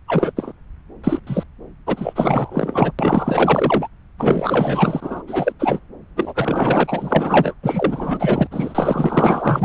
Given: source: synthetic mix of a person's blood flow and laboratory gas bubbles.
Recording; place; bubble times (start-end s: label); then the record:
Doppler ultrasound of blood flow; subclavian vein
0.08-0.31 s: bubbles
0.36-0.53 s: bubbles
1.03-1.20 s: bubbles
1.26-1.44 s: bubbles
1.87-2.92 s: bubbles
2.98-3.88 s: bubbles
4.18-5.24 s: bubbles
5.27-5.53 s: bubbles
5.59-5.79 s: bubbles
6.16-7.54 s: bubbles
7.63-8.47 s: bubbles
8.51-9.65 s: bubbles
From the record:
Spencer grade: 4 (maximum detectable bubble signal sounding continuously throughout systole and diastole of every cardiac period, and overriding the amplitude of the normal cardiac signals); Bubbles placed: anywhere in the cardiac cycle